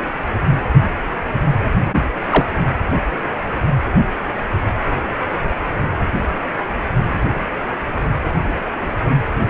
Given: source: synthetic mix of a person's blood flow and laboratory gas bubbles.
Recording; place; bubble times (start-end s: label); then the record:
Doppler ultrasound of blood flow; precordium
2.29-2.46 s: bubbles
From the record:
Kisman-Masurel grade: 113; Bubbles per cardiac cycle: 1 to 2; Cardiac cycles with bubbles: 1 to 10%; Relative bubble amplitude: loud (0.450 to 0.775); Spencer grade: 1 (occasional bubble signal discernible with the cardiac motion signal, with majority of cardiac periods free of bubbles); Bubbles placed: anywhere in the cardiac cycle